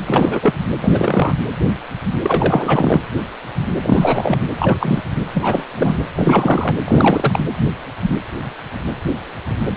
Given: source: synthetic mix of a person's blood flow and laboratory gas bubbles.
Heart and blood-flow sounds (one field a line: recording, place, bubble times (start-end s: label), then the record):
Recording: Doppler ultrasound of blood flow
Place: precordium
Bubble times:
0.05-0.54 s: bubbles
0.82-1.33 s: bubbles
2.22-3.01 s: bubbles
3.82-4.41 s: bubbles
4.58-5.02 s: bubbles
5.35-5.66 s: bubbles
5.75-6.01 s: bubbles
6.15-6.76 s: bubbles
6.85-7.40 s: bubbles
From the record:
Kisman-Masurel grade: 333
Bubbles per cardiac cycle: rolling drumbeat, 9 or more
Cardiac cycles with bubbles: 50 to 99%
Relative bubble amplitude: loud (0.450 to 0.775)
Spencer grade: 3 (all of the cardiac periods contain showers or single bubble signals, but not dominating or overriding the cardiac motion signals)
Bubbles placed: anywhere in the cardiac cycle